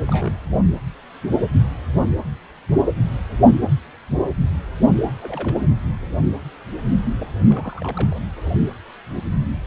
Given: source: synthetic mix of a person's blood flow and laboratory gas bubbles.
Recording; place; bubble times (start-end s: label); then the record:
Doppler ultrasound of blood flow; precordium
0.08-0.37 s: bubbles
5.22-5.61 s: bubbles
7.19-7.28 s: bubbles
7.48-8.19 s: bubbles
From the record:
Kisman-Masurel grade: 221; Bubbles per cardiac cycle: several, 3 to 8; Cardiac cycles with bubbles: 10 to 50%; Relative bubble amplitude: barely perceptible (0.100 to 0.250); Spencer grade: 2 (many but less than half of the cardiac periods contain bubble signals, singularly or in groups); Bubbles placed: anywhere in the cardiac cycle